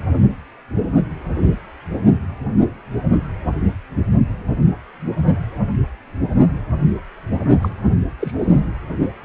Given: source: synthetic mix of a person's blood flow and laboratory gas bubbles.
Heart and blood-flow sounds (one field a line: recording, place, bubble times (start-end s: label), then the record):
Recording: Doppler ultrasound of blood flow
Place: precordium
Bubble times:
7.62-7.69 s: bubbles
8.20-8.32 s: bubbles
8.39-8.61 s: bubbles
From the record:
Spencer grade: 1 (occasional bubble signal discernible with the cardiac motion signal, with majority of cardiac periods free of bubbles)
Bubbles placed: only in the low amplitude regions of the cardiac cycle